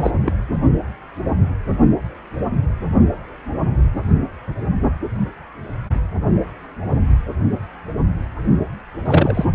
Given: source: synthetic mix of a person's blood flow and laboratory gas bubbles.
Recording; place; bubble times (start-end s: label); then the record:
Doppler ultrasound of blood flow; precordium
0.00-0.14 s: bubbles
0.26-0.32 s: bubbles
9.04-9.46 s: bubbles
From the record:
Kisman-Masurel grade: 223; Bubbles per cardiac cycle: several, 3 to 8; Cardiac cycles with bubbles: 10 to 50%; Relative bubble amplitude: loud (0.450 to 0.775); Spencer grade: 2 (many but less than half of the cardiac periods contain bubble signals, singularly or in groups); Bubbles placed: only in the low amplitude regions of the cardiac cycle